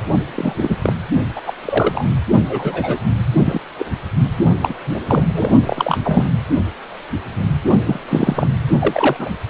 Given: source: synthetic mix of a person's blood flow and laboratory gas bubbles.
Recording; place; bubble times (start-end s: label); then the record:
Doppler ultrasound of blood flow; precordium
0.35-0.76 s: bubbles
0.82-0.94 s: bubbles
1.35-1.42 s: bubbles
1.46-1.53 s: bubbles
1.65-2.08 s: bubbles
2.49-2.98 s: bubbles
3.38-3.60 s: bubbles
3.78-3.86 s: bubbles
4.62-4.74 s: bubbles
4.86-5.00 s: bubbles
5.05-5.24 s: bubbles
5.34-5.51 s: bubbles
5.66-5.98 s: bubbles
6.04-6.26 s: bubbles
7.86-8.00 s: bubbles
8.08-8.47 s: bubbles
8.79-9.29 s: bubbles
From the record:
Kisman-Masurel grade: 233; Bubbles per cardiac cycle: several, 3 to 8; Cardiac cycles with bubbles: 50 to 99%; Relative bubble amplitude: loud (0.450 to 0.775); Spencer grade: 3 (all of the cardiac periods contain showers or single bubble signals, but not dominating or overriding the cardiac motion signals); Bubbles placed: only in the low amplitude regions of the cardiac cycle